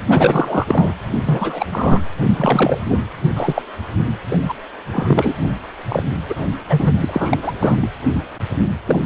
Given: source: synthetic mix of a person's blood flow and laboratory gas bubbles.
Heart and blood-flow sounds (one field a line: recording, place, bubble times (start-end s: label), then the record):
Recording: Doppler ultrasound of blood flow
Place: precordium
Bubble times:
0.09-0.94 s: bubbles
1.26-1.66 s: bubbles
1.72-2.02 s: bubbles
2.23-2.78 s: bubbles
2.89-3.01 s: bubbles
3.35-3.62 s: bubbles
4.30-4.38 s: bubbles
4.48-4.54 s: bubbles
4.92-5.34 s: bubbles
5.88-6.03 s: bubbles
6.29-6.34 s: bubbles
6.69-6.93 s: bubbles
6.97-7.38 s: bubbles
7.42-7.53 s: bubbles
7.59-7.92 s: bubbles
8.83-9.06 s: bubbles
From the record:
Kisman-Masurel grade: 243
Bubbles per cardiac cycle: several, 3 to 8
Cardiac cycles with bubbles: 100%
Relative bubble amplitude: loud (0.450 to 0.775)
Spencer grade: 3 (all of the cardiac periods contain showers or single bubble signals, but not dominating or overriding the cardiac motion signals)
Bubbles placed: anywhere in the cardiac cycle